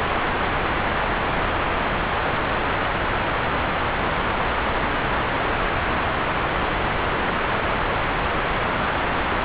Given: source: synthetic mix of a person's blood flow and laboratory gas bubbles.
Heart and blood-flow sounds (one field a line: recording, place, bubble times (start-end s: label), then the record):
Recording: Doppler ultrasound of blood flow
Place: subclavian vein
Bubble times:
no bubbles
From the record:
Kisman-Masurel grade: 000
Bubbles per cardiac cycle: 0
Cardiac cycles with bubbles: 0%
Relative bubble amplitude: no bubbles discernible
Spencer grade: 0 (complete lack of bubble signals)